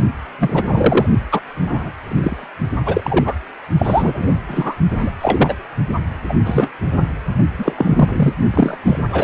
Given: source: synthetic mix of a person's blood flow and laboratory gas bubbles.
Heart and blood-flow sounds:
Doppler ultrasound of blood flow; precordium
0.39-1.06 s: bubbles
1.31-1.41 s: bubbles
1.59-1.90 s: bubbles
2.03-2.48 s: bubbles
2.85-3.34 s: bubbles
3.78-4.34 s: bubbles
4.48-4.75 s: bubbles
4.99-5.11 s: bubbles
5.21-5.54 s: bubbles
6.29-6.33 s: bubbles
6.45-6.70 s: bubbles
7.58-7.74 s: bubbles
7.77-8.33 s: bubbles
8.54-8.78 s: bubbles
8.84-8.98 s: bubbles
9.12-9.24 s: bubbles
From the record:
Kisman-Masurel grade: 243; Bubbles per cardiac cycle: several, 3 to 8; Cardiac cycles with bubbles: 100%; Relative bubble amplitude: loud (0.450 to 0.775); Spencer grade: 3 (all of the cardiac periods contain showers or single bubble signals, but not dominating or overriding the cardiac motion signals); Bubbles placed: only in the low amplitude regions of the cardiac cycle

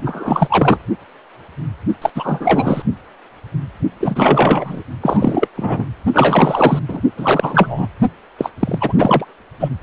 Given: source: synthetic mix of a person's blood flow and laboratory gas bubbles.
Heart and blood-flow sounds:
Doppler ultrasound of blood flow; precordium
0.01-0.78 s: bubbles
2.02-2.10 s: bubbles
2.15-2.83 s: bubbles
4.00-4.83 s: bubbles
5.00-5.48 s: bubbles
5.56-5.85 s: bubbles
6.13-6.79 s: bubbles
6.88-7.01 s: bubbles
7.17-7.88 s: bubbles
8.38-8.50 s: bubbles
8.60-8.93 s: bubbles
8.98-9.25 s: bubbles
9.60-9.69 s: bubbles
From the record:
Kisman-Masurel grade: 333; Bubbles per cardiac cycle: rolling drumbeat, 9 or more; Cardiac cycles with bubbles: 50 to 99%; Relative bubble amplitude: loud (0.450 to 0.775); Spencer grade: 3 (all of the cardiac periods contain showers or single bubble signals, but not dominating or overriding the cardiac motion signals); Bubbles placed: only in the low amplitude regions of the cardiac cycle

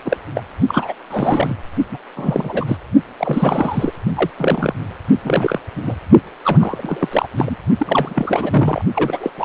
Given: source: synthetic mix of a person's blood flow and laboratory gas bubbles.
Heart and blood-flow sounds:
Doppler ultrasound of blood flow; precordium
0.05-0.17 s: bubbles
0.35-0.42 s: bubbles
0.67-0.93 s: bubbles
1.10-1.54 s: bubbles
1.92-1.98 s: bubbles
2.16-2.79 s: bubbles
3.17-3.92 s: bubbles
4.16-4.30 s: bubbles
4.38-4.75 s: bubbles
5.25-5.59 s: bubbles
5.76-5.82 s: bubbles
5.85-5.98 s: bubbles
6.45-7.08 s: bubbles
7.11-7.28 s: bubbles
7.36-7.56 s: bubbles
7.79-8.82 s: bubbles
8.95-9.30 s: bubbles
9.38-9.45 s: bubbles
From the record:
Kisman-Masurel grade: 342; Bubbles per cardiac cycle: rolling drumbeat, 9 or more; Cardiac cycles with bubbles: 100%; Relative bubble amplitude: moderate (0.250 to 0.450); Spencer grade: 3 (all of the cardiac periods contain showers or single bubble signals, but not dominating or overriding the cardiac motion signals); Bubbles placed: only in the low amplitude regions of the cardiac cycle

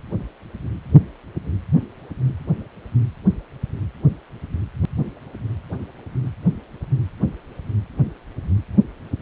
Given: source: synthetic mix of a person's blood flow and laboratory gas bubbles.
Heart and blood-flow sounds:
Doppler ultrasound of blood flow; precordium
no bubbles
From the record:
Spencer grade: 0 (complete lack of bubble signals)

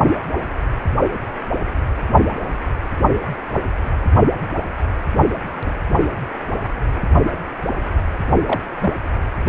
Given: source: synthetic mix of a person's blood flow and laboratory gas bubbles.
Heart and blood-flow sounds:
Doppler ultrasound of blood flow; precordium
5.52-5.82 s: bubbles
8.46-8.63 s: bubbles
8.80-8.93 s: bubbles
From the record:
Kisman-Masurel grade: 122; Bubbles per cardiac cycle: 1 to 2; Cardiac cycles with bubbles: 10 to 50%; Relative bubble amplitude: moderate (0.250 to 0.450); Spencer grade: 2 (many but less than half of the cardiac periods contain bubble signals, singularly or in groups); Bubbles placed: only in the low amplitude regions of the cardiac cycle

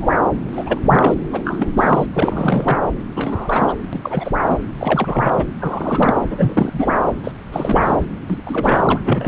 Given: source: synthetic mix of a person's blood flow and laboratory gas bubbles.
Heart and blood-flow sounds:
Doppler ultrasound of blood flow; subclavian vein
0.00-0.14 s: bubbles
0.53-0.78 s: bubbles
0.80-1.14 s: bubbles
1.31-2.06 s: bubbles
2.13-2.81 s: bubbles
3.16-3.74 s: bubbles
3.92-4.00 s: bubbles
4.02-4.31 s: bubbles
4.48-4.58 s: bubbles
4.79-5.34 s: bubbles
5.37-5.45 s: bubbles
5.59-6.15 s: bubbles
6.30-6.93 s: bubbles
7.23-7.31 s: bubbles
7.52-7.96 s: bubbles
8.28-8.41 s: bubbles
8.46-9.28 s: bubbles
From the record:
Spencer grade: 3 (all of the cardiac periods contain showers or single bubble signals, but not dominating or overriding the cardiac motion signals); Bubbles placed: anywhere in the cardiac cycle

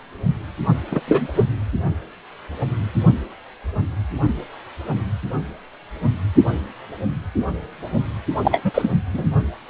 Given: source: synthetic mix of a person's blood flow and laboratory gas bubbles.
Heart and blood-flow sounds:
Doppler ultrasound of blood flow; precordium
0.91-1.00 s: bubbles
1.07-1.27 s: bubbles
1.34-1.45 s: bubbles
8.42-8.62 s: bubbles
8.64-8.92 s: bubbles
9.13-9.25 s: bubbles
From the record:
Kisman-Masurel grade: 223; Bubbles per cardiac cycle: several, 3 to 8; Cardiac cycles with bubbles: 10 to 50%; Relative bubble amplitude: loud (0.450 to 0.775); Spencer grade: 2 (many but less than half of the cardiac periods contain bubble signals, singularly or in groups); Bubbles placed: only in the low amplitude regions of the cardiac cycle

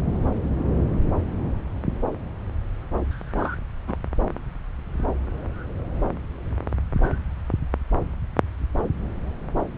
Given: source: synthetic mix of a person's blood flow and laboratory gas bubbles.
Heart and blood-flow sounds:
Doppler ultrasound of blood flow; subclavian vein
3.38-3.56 s: bubbles
3.87-3.96 s: bubbles
From the record:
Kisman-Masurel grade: 112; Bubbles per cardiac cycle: 1 to 2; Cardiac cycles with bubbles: 1 to 10%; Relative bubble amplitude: moderate (0.250 to 0.450); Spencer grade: 1 (occasional bubble signal discernible with the cardiac motion signal, with majority of cardiac periods free of bubbles); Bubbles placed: anywhere in the cardiac cycle

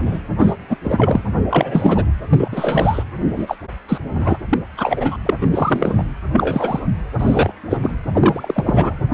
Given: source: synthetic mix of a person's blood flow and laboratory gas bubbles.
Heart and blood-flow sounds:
Doppler ultrasound of blood flow; precordium
0.00-0.20 s: bubbles
0.39-0.54 s: bubbles
0.69-0.77 s: bubbles
0.84-1.23 s: bubbles
1.49-2.05 s: bubbles
2.29-2.48 s: bubbles
2.51-3.04 s: bubbles
3.36-3.56 s: bubbles
3.88-3.98 s: bubbles
4.14-4.36 s: bubbles
4.49-4.58 s: bubbles
4.77-5.17 s: bubbles
5.25-5.34 s: bubbles
5.40-5.47 s: bubbles
5.50-5.95 s: bubbles
5.97-6.03 s: bubbles
6.31-6.80 s: bubbles
7.18-7.51 s: bubbles
7.70-7.77 s: bubbles
7.83-7.98 s: bubbles
8.13-8.94 s: bubbles
9.12-9.14 s: bubbles
From the record:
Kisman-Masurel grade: 243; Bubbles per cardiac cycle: several, 3 to 8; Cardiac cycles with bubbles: 100%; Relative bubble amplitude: loud (0.450 to 0.775); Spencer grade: 3 (all of the cardiac periods contain showers or single bubble signals, but not dominating or overriding the cardiac motion signals); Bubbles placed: anywhere in the cardiac cycle

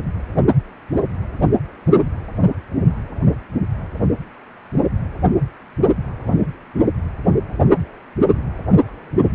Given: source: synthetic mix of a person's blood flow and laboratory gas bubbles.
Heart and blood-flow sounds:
Doppler ultrasound of blood flow; precordium
no bubbles
From the record:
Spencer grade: 0 (complete lack of bubble signals)

